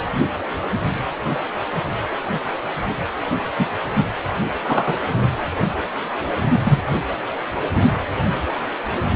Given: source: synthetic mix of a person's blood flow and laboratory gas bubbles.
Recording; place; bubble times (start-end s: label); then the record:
Doppler ultrasound of blood flow; precordium
3.58-3.66 s: bubbles
4.67-4.98 s: bubbles
6.59-6.78 s: bubbles
From the record:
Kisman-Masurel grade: 123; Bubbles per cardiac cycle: 1 to 2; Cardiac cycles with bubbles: 10 to 50%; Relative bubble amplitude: loud (0.450 to 0.775); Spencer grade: 2 (many but less than half of the cardiac periods contain bubble signals, singularly or in groups); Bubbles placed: anywhere in the cardiac cycle